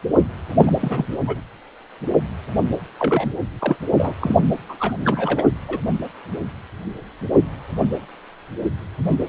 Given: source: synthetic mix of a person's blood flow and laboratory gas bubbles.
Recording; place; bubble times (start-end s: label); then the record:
Doppler ultrasound of blood flow; precordium
0.49-0.72 s: bubbles
0.80-1.06 s: bubbles
1.10-1.20 s: bubbles
1.27-1.41 s: bubbles
2.99-3.32 s: bubbles
3.58-3.77 s: bubbles
3.96-4.14 s: bubbles
4.20-4.36 s: bubbles
4.69-4.77 s: bubbles
4.79-4.93 s: bubbles
5.00-5.49 s: bubbles
5.68-5.79 s: bubbles
9.08-9.17 s: bubbles
From the record:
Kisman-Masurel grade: 332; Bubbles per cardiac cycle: rolling drumbeat, 9 or more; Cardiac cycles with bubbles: 50 to 99%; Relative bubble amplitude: moderate (0.250 to 0.450); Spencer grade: 3 (all of the cardiac periods contain showers or single bubble signals, but not dominating or overriding the cardiac motion signals); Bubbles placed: anywhere in the cardiac cycle